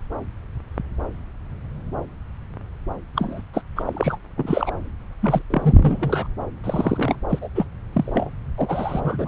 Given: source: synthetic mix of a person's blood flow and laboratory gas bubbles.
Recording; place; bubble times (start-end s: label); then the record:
Doppler ultrasound of blood flow; subclavian vein
3.15-3.41 s: bubbles
3.54-3.62 s: bubbles
3.76-4.17 s: bubbles
4.36-4.71 s: bubbles
5.21-5.42 s: bubbles
5.50-6.27 s: bubbles
6.63-7.16 s: bubbles
7.29-7.49 s: bubbles
7.55-7.65 s: bubbles
7.93-8.30 s: bubbles
8.57-9.28 s: bubbles
From the record:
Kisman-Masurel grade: 332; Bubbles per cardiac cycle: rolling drumbeat, 9 or more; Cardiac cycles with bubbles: 50 to 99%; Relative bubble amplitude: moderate (0.250 to 0.450); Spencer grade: 3 (all of the cardiac periods contain showers or single bubble signals, but not dominating or overriding the cardiac motion signals); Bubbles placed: anywhere in the cardiac cycle